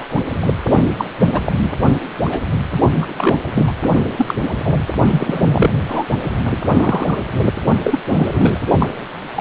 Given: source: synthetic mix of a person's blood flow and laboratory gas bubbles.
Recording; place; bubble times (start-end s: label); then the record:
Doppler ultrasound of blood flow; precordium
0.00-0.06 s: bubbles
0.41-0.53 s: bubbles
0.69-0.82 s: bubbles
0.98-1.05 s: bubbles
1.32-1.41 s: bubbles
1.45-1.88 s: bubbles
2.24-2.42 s: bubbles
2.91-3.37 s: bubbles
3.54-3.74 s: bubbles
4.17-4.34 s: bubbles
4.63-4.85 s: bubbles
5.11-5.74 s: bubbles
5.88-6.04 s: bubbles
6.44-7.24 s: bubbles
7.84-7.99 s: bubbles
8.09-8.59 s: bubbles
8.79-8.93 s: bubbles
9.35-9.41 s: bubbles
From the record:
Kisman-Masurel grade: 233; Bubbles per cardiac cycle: several, 3 to 8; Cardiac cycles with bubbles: 50 to 99%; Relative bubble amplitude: loud (0.450 to 0.775); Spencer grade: 3 (all of the cardiac periods contain showers or single bubble signals, but not dominating or overriding the cardiac motion signals); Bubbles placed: only in the low amplitude regions of the cardiac cycle